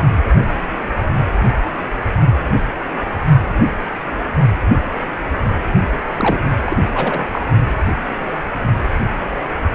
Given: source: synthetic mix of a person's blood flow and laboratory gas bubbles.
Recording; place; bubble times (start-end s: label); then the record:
Doppler ultrasound of blood flow; precordium
6.17-6.39 s: bubbles
6.57-6.76 s: bubbles
6.93-7.27 s: bubbles
7.32-7.41 s: bubbles
From the record:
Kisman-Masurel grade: 212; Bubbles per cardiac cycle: several, 3 to 8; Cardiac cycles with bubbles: 1 to 10%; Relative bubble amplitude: moderate (0.250 to 0.450); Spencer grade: 1 (occasional bubble signal discernible with the cardiac motion signal, with majority of cardiac periods free of bubbles); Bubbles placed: only in the low amplitude regions of the cardiac cycle